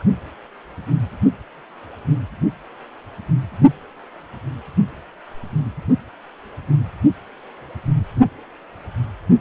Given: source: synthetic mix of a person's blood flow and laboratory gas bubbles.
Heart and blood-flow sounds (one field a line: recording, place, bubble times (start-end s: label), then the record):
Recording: Doppler ultrasound of blood flow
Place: precordium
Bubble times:
0.00-0.03 s: bubbles
From the record:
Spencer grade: 2 (many but less than half of the cardiac periods contain bubble signals, singularly or in groups)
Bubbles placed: only in the low amplitude regions of the cardiac cycle